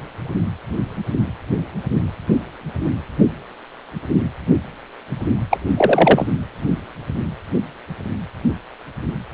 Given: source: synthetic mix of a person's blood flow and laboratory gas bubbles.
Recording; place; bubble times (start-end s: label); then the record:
Doppler ultrasound of blood flow; precordium
5.50-5.58 s: bubbles
5.77-6.27 s: bubbles
From the record:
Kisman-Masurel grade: 213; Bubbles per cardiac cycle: several, 3 to 8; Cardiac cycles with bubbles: 1 to 10%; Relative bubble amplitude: loud (0.450 to 0.775); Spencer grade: 1 (occasional bubble signal discernible with the cardiac motion signal, with majority of cardiac periods free of bubbles); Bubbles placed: anywhere in the cardiac cycle